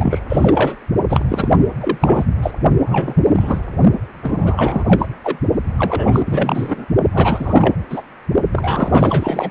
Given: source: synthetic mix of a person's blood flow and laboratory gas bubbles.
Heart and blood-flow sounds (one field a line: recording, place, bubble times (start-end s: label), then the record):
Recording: Doppler ultrasound of blood flow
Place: precordium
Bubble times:
0.00-0.19 s: bubbles
0.29-0.77 s: bubbles
1.08-1.25 s: bubbles
1.28-1.52 s: bubbles
1.80-2.25 s: bubbles
2.42-2.51 s: bubbles
2.87-3.14 s: bubbles
3.24-3.62 s: bubbles
4.22-4.84 s: bubbles
4.87-5.08 s: bubbles
5.23-5.38 s: bubbles
5.78-6.23 s: bubbles
6.25-6.86 s: bubbles
7.13-7.75 s: bubbles
7.89-8.02 s: bubbles
8.52-9.51 s: bubbles
From the record:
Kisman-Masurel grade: 333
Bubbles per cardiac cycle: rolling drumbeat, 9 or more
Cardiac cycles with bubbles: 50 to 99%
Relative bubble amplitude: loud (0.450 to 0.775)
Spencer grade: 3 (all of the cardiac periods contain showers or single bubble signals, but not dominating or overriding the cardiac motion signals)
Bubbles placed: only in the low amplitude regions of the cardiac cycle